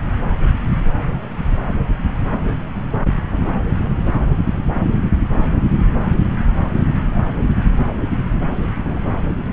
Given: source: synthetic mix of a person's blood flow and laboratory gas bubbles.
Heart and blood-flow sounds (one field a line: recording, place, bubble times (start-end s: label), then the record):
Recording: Doppler ultrasound of blood flow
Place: subclavian vein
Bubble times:
8.84-9.00 s: bubbles
From the record:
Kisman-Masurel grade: 111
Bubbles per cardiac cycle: 1 to 2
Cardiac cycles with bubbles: 1 to 10%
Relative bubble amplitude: barely perceptible (0.100 to 0.250)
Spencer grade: 1 (occasional bubble signal discernible with the cardiac motion signal, with majority of cardiac periods free of bubbles)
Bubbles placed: anywhere in the cardiac cycle